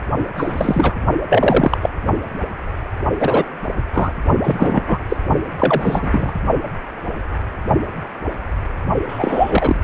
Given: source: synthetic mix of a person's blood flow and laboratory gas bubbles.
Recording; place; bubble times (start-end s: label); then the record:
Doppler ultrasound of blood flow; precordium
0.36-0.92 s: bubbles
1.29-1.79 s: bubbles
1.82-1.90 s: bubbles
3.20-3.46 s: bubbles
3.93-4.12 s: bubbles
4.44-4.99 s: bubbles
5.08-5.17 s: bubbles
5.59-6.33 s: bubbles
9.08-9.76 s: bubbles
From the record:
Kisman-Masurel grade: 223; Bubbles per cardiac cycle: several, 3 to 8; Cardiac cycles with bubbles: 10 to 50%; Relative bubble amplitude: loud (0.450 to 0.775); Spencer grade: 2 (many but less than half of the cardiac periods contain bubble signals, singularly or in groups); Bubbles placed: only in the low amplitude regions of the cardiac cycle